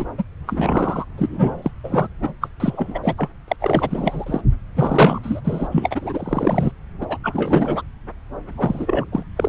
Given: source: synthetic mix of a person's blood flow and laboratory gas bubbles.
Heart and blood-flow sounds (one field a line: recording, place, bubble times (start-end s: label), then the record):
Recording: Doppler ultrasound of blood flow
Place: subclavian vein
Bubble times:
0.00-0.05 s: bubbles
0.18-0.23 s: bubbles
0.46-1.05 s: bubbles
1.17-1.71 s: bubbles
1.83-2.08 s: bubbles
2.22-2.33 s: bubbles
2.41-2.48 s: bubbles
2.60-2.99 s: bubbles
3.02-3.29 s: bubbles
3.48-3.56 s: bubbles
3.60-4.41 s: bubbles
4.75-5.19 s: bubbles
5.23-5.40 s: bubbles
5.44-5.68 s: bubbles
5.71-6.71 s: bubbles
7.01-7.06 s: bubbles
7.08-7.17 s: bubbles
7.23-7.82 s: bubbles
8.47-9.06 s: bubbles
9.12-9.23 s: bubbles
9.37-9.49 s: bubbles
From the record:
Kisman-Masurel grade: 343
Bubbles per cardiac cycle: rolling drumbeat, 9 or more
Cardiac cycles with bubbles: 100%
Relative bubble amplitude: loud (0.450 to 0.775)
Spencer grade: 3 (all of the cardiac periods contain showers or single bubble signals, but not dominating or overriding the cardiac motion signals)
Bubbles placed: anywhere in the cardiac cycle